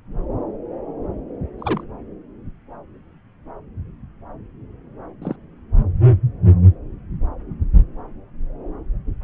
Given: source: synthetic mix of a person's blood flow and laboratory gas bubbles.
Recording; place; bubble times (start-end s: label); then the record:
Doppler ultrasound of blood flow; subclavian vein
1.60-1.83 s: bubbles
5.21-5.36 s: bubbles
From the record:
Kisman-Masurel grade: 122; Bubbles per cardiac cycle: 1 to 2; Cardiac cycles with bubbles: 10 to 50%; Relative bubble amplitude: moderate (0.250 to 0.450); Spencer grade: 2 (many but less than half of the cardiac periods contain bubble signals, singularly or in groups); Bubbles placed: anywhere in the cardiac cycle